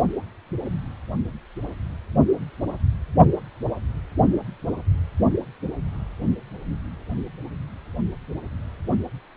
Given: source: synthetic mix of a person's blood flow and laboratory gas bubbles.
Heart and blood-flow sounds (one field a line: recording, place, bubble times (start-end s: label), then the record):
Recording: Doppler ultrasound of blood flow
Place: precordium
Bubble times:
no bubbles
From the record:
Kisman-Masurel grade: 000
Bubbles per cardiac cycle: 0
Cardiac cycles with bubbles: 0%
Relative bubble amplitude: no bubbles discernible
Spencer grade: 0 (complete lack of bubble signals)